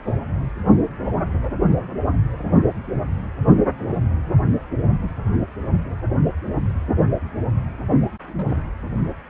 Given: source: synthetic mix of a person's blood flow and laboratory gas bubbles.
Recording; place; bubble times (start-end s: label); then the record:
Doppler ultrasound of blood flow; precordium
8.27-8.63 s: bubbles
From the record:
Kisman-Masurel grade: 111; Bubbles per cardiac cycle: 1 to 2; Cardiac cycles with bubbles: 1 to 10%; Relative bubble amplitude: barely perceptible (0.100 to 0.250); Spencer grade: 1 (occasional bubble signal discernible with the cardiac motion signal, with majority of cardiac periods free of bubbles); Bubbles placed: anywhere in the cardiac cycle